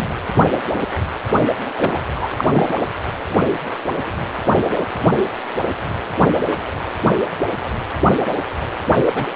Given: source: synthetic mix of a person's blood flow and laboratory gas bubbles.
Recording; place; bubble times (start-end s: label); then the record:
Doppler ultrasound of blood flow; precordium
0.00-0.09 s: bubbles
1.77-1.98 s: bubbles
2.15-2.27 s: bubbles
2.38-2.69 s: bubbles
8.96-9.03 s: bubbles
9.05-9.25 s: bubbles
From the record:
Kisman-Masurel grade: 222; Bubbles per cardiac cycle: several, 3 to 8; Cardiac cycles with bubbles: 10 to 50%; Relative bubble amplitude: moderate (0.250 to 0.450); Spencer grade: 2 (many but less than half of the cardiac periods contain bubble signals, singularly or in groups); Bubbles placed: anywhere in the cardiac cycle